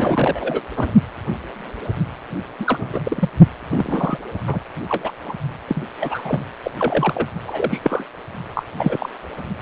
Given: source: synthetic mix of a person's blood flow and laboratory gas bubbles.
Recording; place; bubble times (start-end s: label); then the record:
Doppler ultrasound of blood flow; precordium
0.00-0.61 s: bubbles
0.77-0.92 s: bubbles
2.59-2.89 s: bubbles
2.92-3.30 s: bubbles
3.70-4.17 s: bubbles
4.47-4.60 s: bubbles
4.89-5.12 s: bubbles
5.25-5.34 s: bubbles
5.68-5.82 s: bubbles
6.00-6.42 s: bubbles
6.63-6.71 s: bubbles
6.79-7.29 s: bubbles
7.44-8.04 s: bubbles
8.54-8.63 s: bubbles
8.77-9.10 s: bubbles
From the record:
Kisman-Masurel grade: 232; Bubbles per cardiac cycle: several, 3 to 8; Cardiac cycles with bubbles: 50 to 99%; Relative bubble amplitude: moderate (0.250 to 0.450); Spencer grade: 3 (all of the cardiac periods contain showers or single bubble signals, but not dominating or overriding the cardiac motion signals); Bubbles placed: only in the low amplitude regions of the cardiac cycle